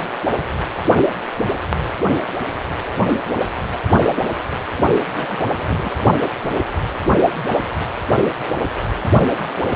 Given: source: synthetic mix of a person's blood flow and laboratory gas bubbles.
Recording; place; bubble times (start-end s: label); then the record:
Doppler ultrasound of blood flow; precordium
5.15-5.49 s: bubbles
5.57-5.91 s: bubbles
From the record:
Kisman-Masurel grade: 211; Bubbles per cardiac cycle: several, 3 to 8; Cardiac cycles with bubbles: 1 to 10%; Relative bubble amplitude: barely perceptible (0.100 to 0.250); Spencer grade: 1 (occasional bubble signal discernible with the cardiac motion signal, with majority of cardiac periods free of bubbles); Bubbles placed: only in the low amplitude regions of the cardiac cycle